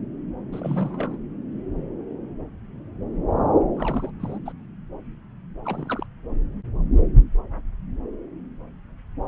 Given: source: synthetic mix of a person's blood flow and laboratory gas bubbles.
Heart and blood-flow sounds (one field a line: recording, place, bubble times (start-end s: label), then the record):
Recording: Doppler ultrasound of blood flow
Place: subclavian vein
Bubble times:
0.52-1.18 s: bubbles
3.76-4.11 s: bubbles
4.19-4.38 s: bubbles
4.46-4.52 s: bubbles
5.65-6.06 s: bubbles
From the record:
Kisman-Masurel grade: 221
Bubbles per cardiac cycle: several, 3 to 8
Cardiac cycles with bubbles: 10 to 50%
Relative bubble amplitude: barely perceptible (0.100 to 0.250)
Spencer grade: 2 (many but less than half of the cardiac periods contain bubble signals, singularly or in groups)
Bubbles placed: anywhere in the cardiac cycle